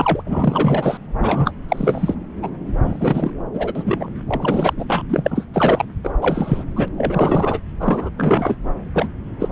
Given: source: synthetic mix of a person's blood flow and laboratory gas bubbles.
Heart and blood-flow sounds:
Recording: Doppler ultrasound of blood flow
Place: subclavian vein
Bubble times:
0.00-0.23 s: bubbles
0.26-0.98 s: bubbles
1.19-1.52 s: bubbles
1.68-2.17 s: bubbles
2.42-2.50 s: bubbles
2.66-3.31 s: bubbles
3.53-4.08 s: bubbles
4.27-4.73 s: bubbles
4.76-5.03 s: bubbles
5.09-5.46 s: bubbles
5.53-5.85 s: bubbles
6.03-6.11 s: bubbles
6.21-6.64 s: bubbles
6.75-6.88 s: bubbles
6.97-7.59 s: bubbles
7.79-8.09 s: bubbles
8.16-8.57 s: bubbles
8.94-9.08 s: bubbles
9.39-9.49 s: bubbles
From the record:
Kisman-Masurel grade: 343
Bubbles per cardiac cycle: rolling drumbeat, 9 or more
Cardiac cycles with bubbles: 100%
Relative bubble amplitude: loud (0.450 to 0.775)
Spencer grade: 3 (all of the cardiac periods contain showers or single bubble signals, but not dominating or overriding the cardiac motion signals)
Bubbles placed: anywhere in the cardiac cycle

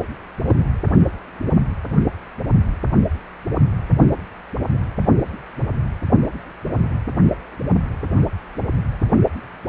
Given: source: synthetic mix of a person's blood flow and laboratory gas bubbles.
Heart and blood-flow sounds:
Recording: Doppler ultrasound of blood flow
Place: precordium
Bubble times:
0.47-0.55 s: bubbles
From the record:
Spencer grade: 1 (occasional bubble signal discernible with the cardiac motion signal, with majority of cardiac periods free of bubbles)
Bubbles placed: only in the low amplitude regions of the cardiac cycle

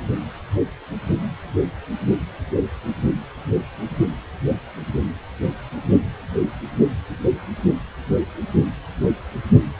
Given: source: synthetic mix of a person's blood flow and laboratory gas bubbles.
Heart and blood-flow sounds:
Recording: Doppler ultrasound of blood flow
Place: precordium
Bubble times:
no bubbles
From the record:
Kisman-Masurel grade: 000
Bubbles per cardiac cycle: 0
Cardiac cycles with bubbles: 0%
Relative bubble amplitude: no bubbles discernible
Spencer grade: 0 (complete lack of bubble signals)

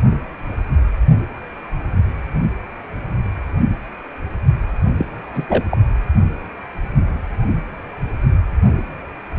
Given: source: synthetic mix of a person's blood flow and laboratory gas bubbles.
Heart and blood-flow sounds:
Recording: Doppler ultrasound of blood flow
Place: precordium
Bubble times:
4.98-5.05 s: bubbles
5.33-5.63 s: bubbles
5.71-5.77 s: bubbles
From the record:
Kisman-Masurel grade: 212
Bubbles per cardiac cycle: several, 3 to 8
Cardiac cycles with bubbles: 1 to 10%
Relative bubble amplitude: moderate (0.250 to 0.450)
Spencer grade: 1 (occasional bubble signal discernible with the cardiac motion signal, with majority of cardiac periods free of bubbles)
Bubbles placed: anywhere in the cardiac cycle

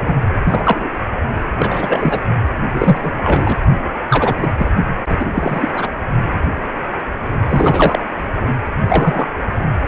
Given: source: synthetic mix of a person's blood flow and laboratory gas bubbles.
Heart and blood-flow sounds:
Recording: Doppler ultrasound of blood flow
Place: precordium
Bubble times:
0.00-0.03 s: bubbles
0.05-0.14 s: bubbles
0.46-0.88 s: bubbles
1.59-2.21 s: bubbles
2.73-3.10 s: bubbles
3.17-3.57 s: bubbles
4.09-4.47 s: bubbles
4.59-4.70 s: bubbles
5.09-5.25 s: bubbles
5.33-5.71 s: bubbles
5.76-5.88 s: bubbles
7.45-8.04 s: bubbles
8.88-9.28 s: bubbles
From the record:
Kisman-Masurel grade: 233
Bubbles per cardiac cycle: several, 3 to 8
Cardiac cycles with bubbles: 50 to 99%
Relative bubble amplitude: loud (0.450 to 0.775)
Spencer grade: 3 (all of the cardiac periods contain showers or single bubble signals, but not dominating or overriding the cardiac motion signals)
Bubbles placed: only in the low amplitude regions of the cardiac cycle

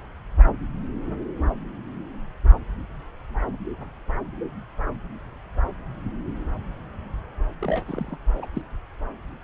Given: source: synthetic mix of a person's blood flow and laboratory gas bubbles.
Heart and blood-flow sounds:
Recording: Doppler ultrasound of blood flow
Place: subclavian vein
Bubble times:
7.60-7.85 s: bubbles
7.88-8.17 s: bubbles
8.35-8.46 s: bubbles
8.54-8.62 s: bubbles
From the record:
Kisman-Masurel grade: 211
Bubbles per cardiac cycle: several, 3 to 8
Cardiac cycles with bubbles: 1 to 10%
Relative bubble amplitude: barely perceptible (0.100 to 0.250)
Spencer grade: 1 (occasional bubble signal discernible with the cardiac motion signal, with majority of cardiac periods free of bubbles)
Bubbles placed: anywhere in the cardiac cycle

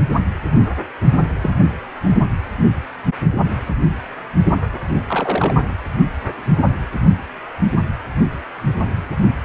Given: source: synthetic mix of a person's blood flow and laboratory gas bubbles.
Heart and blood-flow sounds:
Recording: Doppler ultrasound of blood flow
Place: precordium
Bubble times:
1.41-1.51 s: bubbles
5.07-5.54 s: bubbles
From the record:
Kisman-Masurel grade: 122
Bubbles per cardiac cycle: 1 to 2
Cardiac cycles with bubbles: 10 to 50%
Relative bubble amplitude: moderate (0.250 to 0.450)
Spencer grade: 2 (many but less than half of the cardiac periods contain bubble signals, singularly or in groups)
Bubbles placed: only in the low amplitude regions of the cardiac cycle

